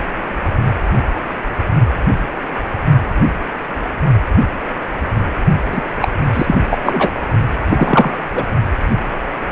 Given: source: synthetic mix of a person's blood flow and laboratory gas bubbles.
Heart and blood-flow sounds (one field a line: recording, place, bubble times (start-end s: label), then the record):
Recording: Doppler ultrasound of blood flow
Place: precordium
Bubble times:
5.71-5.83 s: bubbles
6.01-6.13 s: bubbles
6.33-6.58 s: bubbles
6.70-6.78 s: bubbles
6.84-7.12 s: bubbles
7.66-8.18 s: bubbles
8.35-8.44 s: bubbles
From the record:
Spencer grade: 3 (all of the cardiac periods contain showers or single bubble signals, but not dominating or overriding the cardiac motion signals)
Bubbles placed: only in the low amplitude regions of the cardiac cycle